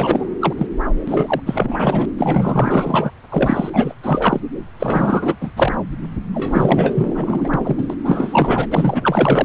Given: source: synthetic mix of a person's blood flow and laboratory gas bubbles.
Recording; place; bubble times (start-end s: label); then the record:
Doppler ultrasound of blood flow; subclavian vein
0.00-0.30 s: bubbles
0.40-0.53 s: bubbles
0.57-0.66 s: bubbles
1.07-1.41 s: bubbles
1.46-2.05 s: bubbles
2.17-3.11 s: bubbles
3.30-3.70 s: bubbles
3.72-3.93 s: bubbles
4.02-4.40 s: bubbles
4.79-5.35 s: bubbles
5.40-5.51 s: bubbles
5.56-5.75 s: bubbles
6.33-7.87 s: bubbles
7.89-7.94 s: bubbles
8.04-8.68 s: bubbles
8.71-9.45 s: bubbles
From the record:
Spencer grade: 4 (maximum detectable bubble signal sounding continuously throughout systole and diastole of every cardiac period, and overriding the amplitude of the normal cardiac signals); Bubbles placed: anywhere in the cardiac cycle